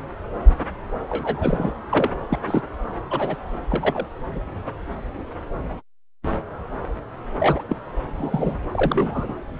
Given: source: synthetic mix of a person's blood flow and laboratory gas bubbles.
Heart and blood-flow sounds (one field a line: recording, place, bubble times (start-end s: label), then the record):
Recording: Doppler ultrasound of blood flow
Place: subclavian vein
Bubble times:
1.09-1.74 s: bubbles
1.89-2.10 s: bubbles
2.29-2.38 s: bubbles
2.46-2.62 s: bubbles
3.10-3.37 s: bubbles
3.70-4.06 s: bubbles
4.31-4.39 s: bubbles
7.39-7.62 s: bubbles
7.69-7.76 s: bubbles
8.17-8.58 s: bubbles
8.73-9.34 s: bubbles
From the record:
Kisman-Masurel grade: 232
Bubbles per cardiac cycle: several, 3 to 8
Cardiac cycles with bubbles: 50 to 99%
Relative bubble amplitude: moderate (0.250 to 0.450)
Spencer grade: 3 (all of the cardiac periods contain showers or single bubble signals, but not dominating or overriding the cardiac motion signals)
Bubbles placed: anywhere in the cardiac cycle